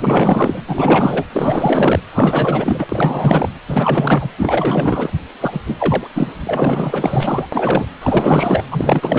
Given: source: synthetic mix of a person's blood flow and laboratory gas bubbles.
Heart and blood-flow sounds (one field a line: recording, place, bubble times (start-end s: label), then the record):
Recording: Doppler ultrasound of blood flow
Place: precordium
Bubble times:
0.00-0.60 s: bubbles
0.67-1.27 s: bubbles
1.32-2.00 s: bubbles
2.12-3.49 s: bubbles
3.68-4.29 s: bubbles
4.38-5.12 s: bubbles
5.41-5.61 s: bubbles
5.67-6.07 s: bubbles
6.15-6.32 s: bubbles
6.45-7.48 s: bubbles
7.52-7.87 s: bubbles
8.02-8.64 s: bubbles
8.71-9.19 s: bubbles
From the record:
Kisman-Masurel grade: 444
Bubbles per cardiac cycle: continuous sound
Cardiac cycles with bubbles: 100%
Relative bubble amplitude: maximal (0.775 to 0.999)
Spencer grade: 4 (maximum detectable bubble signal sounding continuously throughout systole and diastole of every cardiac period, and overriding the amplitude of the normal cardiac signals)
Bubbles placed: anywhere in the cardiac cycle